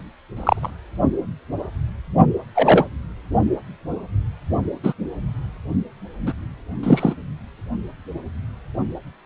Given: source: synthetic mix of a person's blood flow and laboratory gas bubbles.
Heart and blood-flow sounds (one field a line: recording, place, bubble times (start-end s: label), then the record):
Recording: Doppler ultrasound of blood flow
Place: precordium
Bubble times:
0.36-0.70 s: bubbles
2.54-2.86 s: bubbles
4.83-4.93 s: bubbles
6.26-6.33 s: bubbles
6.83-7.13 s: bubbles
From the record:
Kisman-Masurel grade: 123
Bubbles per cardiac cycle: 1 to 2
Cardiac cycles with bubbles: 10 to 50%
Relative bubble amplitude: loud (0.450 to 0.775)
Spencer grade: 2 (many but less than half of the cardiac periods contain bubble signals, singularly or in groups)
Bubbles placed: only in the low amplitude regions of the cardiac cycle